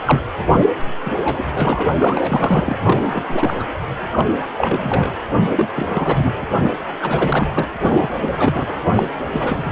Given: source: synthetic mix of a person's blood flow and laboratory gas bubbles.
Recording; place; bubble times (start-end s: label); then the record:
Doppler ultrasound of blood flow; precordium
0.05-0.22 s: bubbles
0.52-0.65 s: bubbles
1.04-1.12 s: bubbles
1.24-1.45 s: bubbles
1.54-1.83 s: bubbles
1.92-2.76 s: bubbles
2.81-3.66 s: bubbles
4.00-4.27 s: bubbles
4.58-5.13 s: bubbles
5.49-5.67 s: bubbles
5.75-6.46 s: bubbles
7.01-7.46 s: bubbles
7.55-7.69 s: bubbles
7.79-8.09 s: bubbles
8.22-8.79 s: bubbles
8.94-9.09 s: bubbles
9.33-9.71 s: bubbles
From the record:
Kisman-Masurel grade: 342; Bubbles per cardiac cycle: rolling drumbeat, 9 or more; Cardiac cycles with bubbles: 100%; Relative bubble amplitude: moderate (0.250 to 0.450); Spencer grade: 3 (all of the cardiac periods contain showers or single bubble signals, but not dominating or overriding the cardiac motion signals); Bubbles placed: anywhere in the cardiac cycle